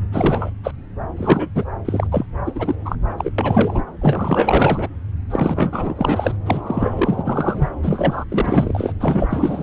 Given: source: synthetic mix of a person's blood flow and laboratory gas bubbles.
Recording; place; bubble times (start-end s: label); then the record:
Doppler ultrasound of blood flow; subclavian vein
0.11-0.51 s: bubbles
0.64-0.71 s: bubbles
1.17-1.49 s: bubbles
1.54-1.65 s: bubbles
1.85-2.07 s: bubbles
2.11-2.26 s: bubbles
2.46-2.75 s: bubbles
2.85-2.98 s: bubbles
3.17-3.32 s: bubbles
3.38-3.83 s: bubbles
4.01-4.88 s: bubbles
5.30-6.37 s: bubbles
6.46-6.62 s: bubbles
6.67-7.69 s: bubbles
7.82-8.24 s: bubbles
8.29-8.94 s: bubbles
9.00-9.63 s: bubbles
From the record:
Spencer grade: 4 (maximum detectable bubble signal sounding continuously throughout systole and diastole of every cardiac period, and overriding the amplitude of the normal cardiac signals); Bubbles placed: anywhere in the cardiac cycle